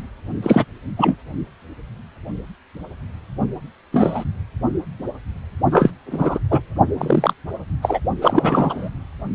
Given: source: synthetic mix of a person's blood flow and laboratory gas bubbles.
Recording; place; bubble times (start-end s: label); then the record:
Doppler ultrasound of blood flow; precordium
0.42-0.65 s: bubbles
0.97-1.16 s: bubbles
3.92-4.24 s: bubbles
5.71-5.91 s: bubbles
6.10-6.39 s: bubbles
6.50-6.60 s: bubbles
6.97-7.33 s: bubbles
7.82-8.00 s: bubbles
8.21-8.89 s: bubbles
From the record:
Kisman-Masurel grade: 233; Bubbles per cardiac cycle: several, 3 to 8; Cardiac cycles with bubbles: 50 to 99%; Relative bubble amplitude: loud (0.450 to 0.775); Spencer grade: 3 (all of the cardiac periods contain showers or single bubble signals, but not dominating or overriding the cardiac motion signals); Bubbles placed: only in the low amplitude regions of the cardiac cycle